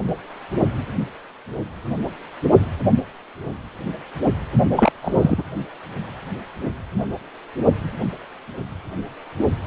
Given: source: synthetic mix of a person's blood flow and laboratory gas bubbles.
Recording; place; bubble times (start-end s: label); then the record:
Doppler ultrasound of blood flow; precordium
4.76-4.92 s: bubbles
5.02-5.44 s: bubbles
From the record:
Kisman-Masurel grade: 212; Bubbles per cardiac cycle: several, 3 to 8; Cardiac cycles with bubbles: 1 to 10%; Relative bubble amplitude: moderate (0.250 to 0.450); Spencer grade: 1 (occasional bubble signal discernible with the cardiac motion signal, with majority of cardiac periods free of bubbles); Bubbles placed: only in the low amplitude regions of the cardiac cycle